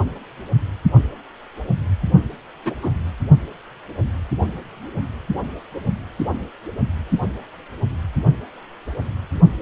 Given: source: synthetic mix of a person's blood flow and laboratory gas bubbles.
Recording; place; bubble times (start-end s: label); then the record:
Doppler ultrasound of blood flow; precordium
2.65-2.75 s: bubbles
2.82-2.91 s: bubbles
From the record:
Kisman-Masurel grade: 112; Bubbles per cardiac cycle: 1 to 2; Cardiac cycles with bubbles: 1 to 10%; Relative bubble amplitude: moderate (0.250 to 0.450); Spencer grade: 1 (occasional bubble signal discernible with the cardiac motion signal, with majority of cardiac periods free of bubbles); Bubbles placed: anywhere in the cardiac cycle